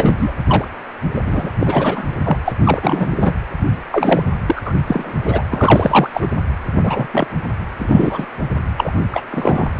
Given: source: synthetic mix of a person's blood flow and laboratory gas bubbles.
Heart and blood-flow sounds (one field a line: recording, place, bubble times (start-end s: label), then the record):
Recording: Doppler ultrasound of blood flow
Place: precordium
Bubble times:
0.00-0.32 s: bubbles
0.47-0.65 s: bubbles
1.16-1.21 s: bubbles
1.27-1.53 s: bubbles
1.60-2.05 s: bubbles
2.24-2.37 s: bubbles
2.45-2.54 s: bubbles
2.65-3.35 s: bubbles
3.92-4.23 s: bubbles
4.46-4.62 s: bubbles
4.66-4.73 s: bubbles
4.87-5.13 s: bubbles
5.25-5.42 s: bubbles
5.50-6.10 s: bubbles
6.13-6.28 s: bubbles
6.83-7.07 s: bubbles
7.11-7.27 s: bubbles
7.78-8.26 s: bubbles
8.77-8.92 s: bubbles
9.11-9.22 s: bubbles
9.31-9.69 s: bubbles
From the record:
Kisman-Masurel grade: 243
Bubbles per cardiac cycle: several, 3 to 8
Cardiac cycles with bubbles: 100%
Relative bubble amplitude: loud (0.450 to 0.775)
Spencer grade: 3 (all of the cardiac periods contain showers or single bubble signals, but not dominating or overriding the cardiac motion signals)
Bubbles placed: anywhere in the cardiac cycle